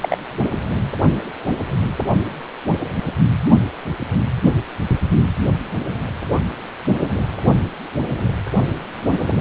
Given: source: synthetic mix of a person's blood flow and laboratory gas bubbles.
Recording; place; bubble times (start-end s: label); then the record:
Doppler ultrasound of blood flow; precordium
0.01-0.17 s: bubbles
From the record:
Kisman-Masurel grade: 212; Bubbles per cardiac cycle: several, 3 to 8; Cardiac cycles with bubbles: 1 to 10%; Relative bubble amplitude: moderate (0.250 to 0.450); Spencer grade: 1 (occasional bubble signal discernible with the cardiac motion signal, with majority of cardiac periods free of bubbles); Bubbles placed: anywhere in the cardiac cycle